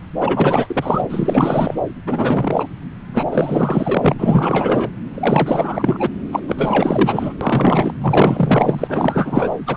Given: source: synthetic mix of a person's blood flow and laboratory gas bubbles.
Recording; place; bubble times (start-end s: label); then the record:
Doppler ultrasound of blood flow; subclavian vein
0.20-1.05 s: bubbles
1.09-1.80 s: bubbles
2.06-2.67 s: bubbles
3.13-3.24 s: bubbles
3.31-4.14 s: bubbles
4.18-4.91 s: bubbles
5.14-6.10 s: bubbles
6.31-6.41 s: bubbles
6.47-7.33 s: bubbles
7.41-7.94 s: bubbles
8.01-9.50 s: bubbles
9.67-9.77 s: bubbles
From the record:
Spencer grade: 4 (maximum detectable bubble signal sounding continuously throughout systole and diastole of every cardiac period, and overriding the amplitude of the normal cardiac signals); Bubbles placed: anywhere in the cardiac cycle